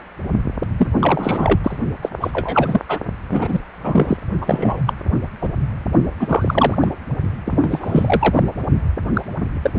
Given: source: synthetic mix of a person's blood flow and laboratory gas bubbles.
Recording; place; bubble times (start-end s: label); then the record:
Doppler ultrasound of blood flow; precordium
0.00-0.02 s: bubbles
0.78-0.92 s: bubbles
0.99-1.58 s: bubbles
1.63-1.77 s: bubbles
2.02-2.09 s: bubbles
2.21-2.83 s: bubbles
2.88-3.00 s: bubbles
3.30-3.60 s: bubbles
3.84-4.17 s: bubbles
4.41-4.81 s: bubbles
4.86-4.93 s: bubbles
5.42-5.49 s: bubbles
6.19-6.75 s: bubbles
6.81-6.92 s: bubbles
7.45-8.43 s: bubbles
9.13-9.22 s: bubbles
9.62-9.71 s: bubbles
9.74-9.78 s: bubbles
From the record:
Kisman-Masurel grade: 243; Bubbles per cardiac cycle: several, 3 to 8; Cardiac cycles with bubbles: 100%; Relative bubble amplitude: loud (0.450 to 0.775); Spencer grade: 3 (all of the cardiac periods contain showers or single bubble signals, but not dominating or overriding the cardiac motion signals); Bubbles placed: only in the low amplitude regions of the cardiac cycle